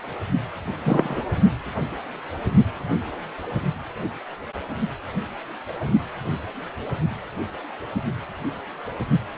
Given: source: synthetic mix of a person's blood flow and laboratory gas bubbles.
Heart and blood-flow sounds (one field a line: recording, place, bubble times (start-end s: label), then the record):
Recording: Doppler ultrasound of blood flow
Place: precordium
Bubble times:
0.84-1.21 s: bubbles
From the record:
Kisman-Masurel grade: 113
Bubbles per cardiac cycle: 1 to 2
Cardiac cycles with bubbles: 1 to 10%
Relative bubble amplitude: loud (0.450 to 0.775)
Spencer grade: 1 (occasional bubble signal discernible with the cardiac motion signal, with majority of cardiac periods free of bubbles)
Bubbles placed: only in the low amplitude regions of the cardiac cycle